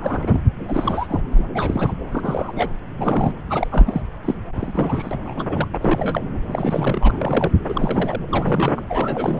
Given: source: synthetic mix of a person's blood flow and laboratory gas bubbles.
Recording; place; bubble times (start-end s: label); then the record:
Doppler ultrasound of blood flow; subclavian vein
0.00-0.40 s: bubbles
0.68-1.22 s: bubbles
1.30-1.49 s: bubbles
1.54-1.94 s: bubbles
2.10-2.68 s: bubbles
2.97-3.35 s: bubbles
3.50-3.67 s: bubbles
3.71-4.02 s: bubbles
4.25-4.35 s: bubbles
4.59-5.18 s: bubbles
5.25-5.67 s: bubbles
5.74-5.78 s: bubbles
5.80-6.21 s: bubbles
6.46-7.51 s: bubbles
7.68-8.21 s: bubbles
8.28-8.81 s: bubbles
8.88-9.40 s: bubbles
From the record:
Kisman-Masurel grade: 342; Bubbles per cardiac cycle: rolling drumbeat, 9 or more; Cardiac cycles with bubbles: 100%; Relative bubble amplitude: moderate (0.250 to 0.450); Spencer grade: 3 (all of the cardiac periods contain showers or single bubble signals, but not dominating or overriding the cardiac motion signals); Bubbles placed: anywhere in the cardiac cycle